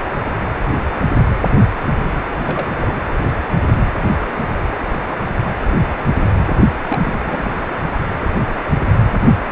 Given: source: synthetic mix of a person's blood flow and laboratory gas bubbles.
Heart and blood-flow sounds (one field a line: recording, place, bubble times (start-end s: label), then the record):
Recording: Doppler ultrasound of blood flow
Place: precordium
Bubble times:
2.33-2.69 s: bubbles
2.80-3.00 s: bubbles
6.88-7.53 s: bubbles
From the record:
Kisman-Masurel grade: 221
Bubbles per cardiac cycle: several, 3 to 8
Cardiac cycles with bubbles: 10 to 50%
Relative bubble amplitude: barely perceptible (0.100 to 0.250)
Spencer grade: 2 (many but less than half of the cardiac periods contain bubble signals, singularly or in groups)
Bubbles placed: anywhere in the cardiac cycle